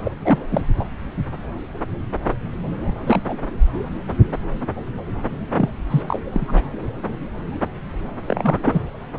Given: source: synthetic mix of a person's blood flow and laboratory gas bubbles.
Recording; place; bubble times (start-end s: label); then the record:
Doppler ultrasound of blood flow; subclavian vein
0.04-0.11 s: bubbles
0.24-0.38 s: bubbles
0.51-0.62 s: bubbles
0.79-0.84 s: bubbles
2.83-2.95 s: bubbles
3.04-3.20 s: bubbles
3.28-3.37 s: bubbles
5.58-5.69 s: bubbles
5.90-6.02 s: bubbles
6.08-6.19 s: bubbles
6.32-6.64 s: bubbles
8.25-8.61 s: bubbles
8.65-8.81 s: bubbles
From the record:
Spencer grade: 2 (many but less than half of the cardiac periods contain bubble signals, singularly or in groups); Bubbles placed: anywhere in the cardiac cycle